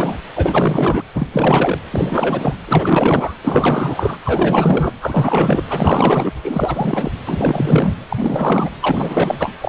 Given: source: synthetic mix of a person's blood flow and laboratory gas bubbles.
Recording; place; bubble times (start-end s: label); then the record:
Doppler ultrasound of blood flow; precordium
0.00-0.18 s: bubbles
0.34-1.02 s: bubbles
1.14-1.28 s: bubbles
1.33-1.78 s: bubbles
1.91-2.53 s: bubbles
2.67-3.34 s: bubbles
3.42-4.17 s: bubbles
4.23-4.92 s: bubbles
5.01-5.62 s: bubbles
5.70-6.31 s: bubbles
6.43-7.12 s: bubbles
7.25-7.93 s: bubbles
8.08-8.71 s: bubbles
8.80-9.54 s: bubbles
9.61-9.69 s: bubbles
From the record:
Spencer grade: 4 (maximum detectable bubble signal sounding continuously throughout systole and diastole of every cardiac period, and overriding the amplitude of the normal cardiac signals); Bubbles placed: anywhere in the cardiac cycle